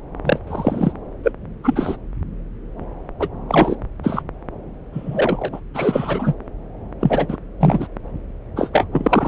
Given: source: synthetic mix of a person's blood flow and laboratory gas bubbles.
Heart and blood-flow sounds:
Doppler ultrasound of blood flow; subclavian vein
0.24-0.40 s: bubbles
0.47-0.92 s: bubbles
1.23-1.32 s: bubbles
1.64-1.97 s: bubbles
3.20-3.29 s: bubbles
3.48-3.76 s: bubbles
4.03-4.22 s: bubbles
4.93-5.60 s: bubbles
5.74-6.34 s: bubbles
7.00-7.36 s: bubbles
7.60-7.88 s: bubbles
8.56-8.70 s: bubbles
8.72-8.87 s: bubbles
8.91-9.28 s: bubbles
From the record:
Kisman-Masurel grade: 243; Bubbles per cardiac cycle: several, 3 to 8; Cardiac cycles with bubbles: 100%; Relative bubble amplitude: loud (0.450 to 0.775); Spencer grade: 3 (all of the cardiac periods contain showers or single bubble signals, but not dominating or overriding the cardiac motion signals); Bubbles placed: anywhere in the cardiac cycle

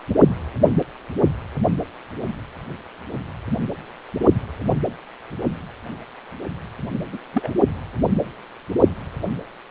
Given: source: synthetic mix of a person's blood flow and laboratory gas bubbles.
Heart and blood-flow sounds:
Doppler ultrasound of blood flow; precordium
7.12-7.19 s: bubbles
7.33-7.50 s: bubbles
From the record:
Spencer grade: 2 (many but less than half of the cardiac periods contain bubble signals, singularly or in groups); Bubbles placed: only in the low amplitude regions of the cardiac cycle

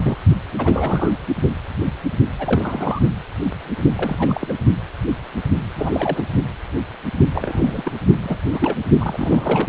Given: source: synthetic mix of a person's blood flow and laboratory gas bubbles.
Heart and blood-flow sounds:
Doppler ultrasound of blood flow; precordium
0.02-0.16 s: bubbles
0.57-1.16 s: bubbles
2.38-3.00 s: bubbles
3.96-4.53 s: bubbles
5.75-6.29 s: bubbles
7.30-7.93 s: bubbles
8.23-8.38 s: bubbles
8.53-8.78 s: bubbles
9.00-9.69 s: bubbles
From the record:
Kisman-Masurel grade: 332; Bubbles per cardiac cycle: rolling drumbeat, 9 or more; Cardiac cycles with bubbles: 50 to 99%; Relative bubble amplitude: moderate (0.250 to 0.450); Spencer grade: 3 (all of the cardiac periods contain showers or single bubble signals, but not dominating or overriding the cardiac motion signals); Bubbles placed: only in the low amplitude regions of the cardiac cycle

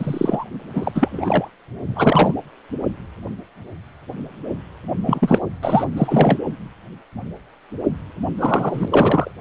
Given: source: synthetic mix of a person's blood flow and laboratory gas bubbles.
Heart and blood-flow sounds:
Doppler ultrasound of blood flow; precordium
0.00-0.44 s: bubbles
0.74-0.92 s: bubbles
0.94-1.50 s: bubbles
1.85-2.34 s: bubbles
5.05-5.39 s: bubbles
5.61-5.84 s: bubbles
5.96-6.38 s: bubbles
8.38-9.32 s: bubbles
From the record:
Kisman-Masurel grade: 223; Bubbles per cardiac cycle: several, 3 to 8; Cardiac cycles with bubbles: 10 to 50%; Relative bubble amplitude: loud (0.450 to 0.775); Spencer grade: 2 (many but less than half of the cardiac periods contain bubble signals, singularly or in groups); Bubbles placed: anywhere in the cardiac cycle

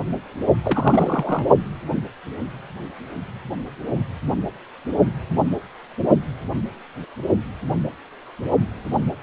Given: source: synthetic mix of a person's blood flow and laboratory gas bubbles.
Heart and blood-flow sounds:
Doppler ultrasound of blood flow; precordium
0.64-1.47 s: bubbles
From the record:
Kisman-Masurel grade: 212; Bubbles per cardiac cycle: several, 3 to 8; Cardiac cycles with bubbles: 1 to 10%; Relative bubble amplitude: moderate (0.250 to 0.450); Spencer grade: 1 (occasional bubble signal discernible with the cardiac motion signal, with majority of cardiac periods free of bubbles); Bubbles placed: only in the low amplitude regions of the cardiac cycle

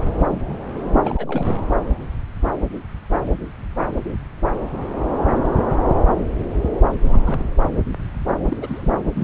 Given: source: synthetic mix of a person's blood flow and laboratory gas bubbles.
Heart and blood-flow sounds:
Doppler ultrasound of blood flow; subclavian vein
1.01-1.53 s: bubbles
7.03-7.44 s: bubbles
8.48-8.56 s: bubbles
8.61-8.94 s: bubbles
9.13-9.24 s: bubbles
From the record:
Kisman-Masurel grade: 221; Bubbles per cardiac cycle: several, 3 to 8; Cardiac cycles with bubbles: 10 to 50%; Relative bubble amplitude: barely perceptible (0.100 to 0.250); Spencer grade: 2 (many but less than half of the cardiac periods contain bubble signals, singularly or in groups); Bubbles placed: anywhere in the cardiac cycle

